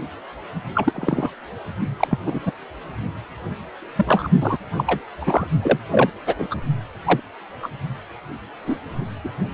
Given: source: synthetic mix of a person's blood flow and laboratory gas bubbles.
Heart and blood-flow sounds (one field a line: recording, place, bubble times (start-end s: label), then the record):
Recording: Doppler ultrasound of blood flow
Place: precordium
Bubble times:
0.75-1.30 s: bubbles
1.99-2.07 s: bubbles
2.10-2.19 s: bubbles
2.26-2.40 s: bubbles
2.45-2.52 s: bubbles
3.95-4.29 s: bubbles
4.41-4.58 s: bubbles
4.77-4.84 s: bubbles
4.87-5.00 s: bubbles
5.21-5.46 s: bubbles
5.62-5.79 s: bubbles
5.92-6.10 s: bubbles
6.26-6.35 s: bubbles
6.39-6.48 s: bubbles
6.50-6.55 s: bubbles
7.04-7.20 s: bubbles
7.62-7.70 s: bubbles
8.66-8.76 s: bubbles
9.24-9.29 s: bubbles
From the record:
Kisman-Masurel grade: 232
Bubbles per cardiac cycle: several, 3 to 8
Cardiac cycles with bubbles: 50 to 99%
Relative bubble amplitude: moderate (0.250 to 0.450)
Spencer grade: 3 (all of the cardiac periods contain showers or single bubble signals, but not dominating or overriding the cardiac motion signals)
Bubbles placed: only in the low amplitude regions of the cardiac cycle